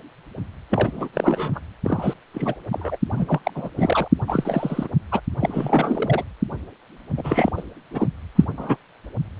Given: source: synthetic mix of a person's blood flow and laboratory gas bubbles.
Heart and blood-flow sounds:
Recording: Doppler ultrasound of blood flow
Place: precordium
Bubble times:
0.70-1.08 s: bubbles
1.12-1.59 s: bubbles
1.83-2.14 s: bubbles
2.33-2.58 s: bubbles
2.72-2.97 s: bubbles
3.13-3.41 s: bubbles
3.43-3.51 s: bubbles
3.54-3.69 s: bubbles
3.77-4.08 s: bubbles
4.28-4.88 s: bubbles
5.12-5.21 s: bubbles
5.41-6.24 s: bubbles
7.17-7.51 s: bubbles
7.57-7.62 s: bubbles
7.92-8.07 s: bubbles
8.35-8.45 s: bubbles
8.57-8.77 s: bubbles
From the record:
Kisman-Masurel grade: 332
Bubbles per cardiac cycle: rolling drumbeat, 9 or more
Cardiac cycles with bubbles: 50 to 99%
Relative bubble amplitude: moderate (0.250 to 0.450)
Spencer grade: 3 (all of the cardiac periods contain showers or single bubble signals, but not dominating or overriding the cardiac motion signals)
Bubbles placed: anywhere in the cardiac cycle

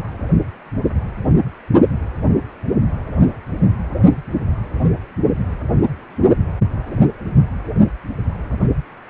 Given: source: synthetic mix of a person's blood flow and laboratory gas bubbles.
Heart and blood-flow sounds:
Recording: Doppler ultrasound of blood flow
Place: precordium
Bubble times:
no bubbles
From the record:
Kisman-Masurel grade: 000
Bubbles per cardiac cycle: 0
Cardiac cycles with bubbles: 0%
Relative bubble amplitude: no bubbles discernible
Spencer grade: 0 (complete lack of bubble signals)

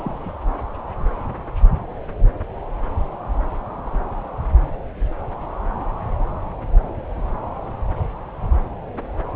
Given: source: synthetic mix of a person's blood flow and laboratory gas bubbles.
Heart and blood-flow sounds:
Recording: Doppler ultrasound of blood flow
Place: subclavian vein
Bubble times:
0.00-0.32 s: bubbles
From the record:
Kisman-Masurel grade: 112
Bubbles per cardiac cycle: 1 to 2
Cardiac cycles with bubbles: 1 to 10%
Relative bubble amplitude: moderate (0.250 to 0.450)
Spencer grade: 1 (occasional bubble signal discernible with the cardiac motion signal, with majority of cardiac periods free of bubbles)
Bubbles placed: anywhere in the cardiac cycle

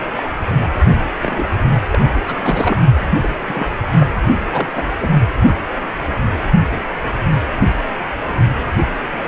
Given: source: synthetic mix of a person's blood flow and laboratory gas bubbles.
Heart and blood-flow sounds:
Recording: Doppler ultrasound of blood flow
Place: precordium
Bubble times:
0.16-0.23 s: bubbles
0.61-0.68 s: bubbles
1.22-1.49 s: bubbles
1.92-1.99 s: bubbles
2.13-2.24 s: bubbles
2.27-2.38 s: bubbles
2.43-2.77 s: bubbles
3.22-3.30 s: bubbles
3.40-3.76 s: bubbles
3.99-4.06 s: bubbles
4.51-4.83 s: bubbles
5.00-5.09 s: bubbles
From the record:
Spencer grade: 2 (many but less than half of the cardiac periods contain bubble signals, singularly or in groups)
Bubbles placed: only in the low amplitude regions of the cardiac cycle

